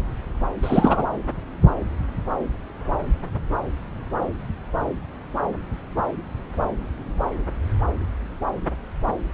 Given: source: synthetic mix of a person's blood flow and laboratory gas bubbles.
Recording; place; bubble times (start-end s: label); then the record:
Doppler ultrasound of blood flow; subclavian vein
0.62-1.06 s: bubbles
From the record:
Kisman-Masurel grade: 213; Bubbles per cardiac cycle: several, 3 to 8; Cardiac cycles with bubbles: 1 to 10%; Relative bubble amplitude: loud (0.450 to 0.775); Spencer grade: 1 (occasional bubble signal discernible with the cardiac motion signal, with majority of cardiac periods free of bubbles); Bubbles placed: anywhere in the cardiac cycle